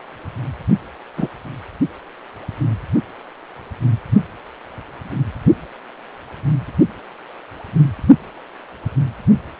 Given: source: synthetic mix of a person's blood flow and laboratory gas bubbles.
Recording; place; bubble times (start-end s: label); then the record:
Doppler ultrasound of blood flow; precordium
1.17-1.28 s: bubbles
From the record:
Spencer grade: 1 (occasional bubble signal discernible with the cardiac motion signal, with majority of cardiac periods free of bubbles); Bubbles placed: only in the low amplitude regions of the cardiac cycle